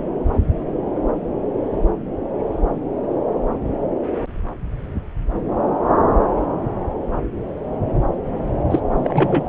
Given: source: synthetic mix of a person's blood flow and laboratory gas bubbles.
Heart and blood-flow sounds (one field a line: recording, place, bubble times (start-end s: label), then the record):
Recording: Doppler ultrasound of blood flow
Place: subclavian vein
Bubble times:
8.71-8.79 s: bubbles
8.94-9.44 s: bubbles
From the record:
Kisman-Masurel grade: 223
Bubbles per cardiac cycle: several, 3 to 8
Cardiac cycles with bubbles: 10 to 50%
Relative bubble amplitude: loud (0.450 to 0.775)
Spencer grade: 2 (many but less than half of the cardiac periods contain bubble signals, singularly or in groups)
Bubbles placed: anywhere in the cardiac cycle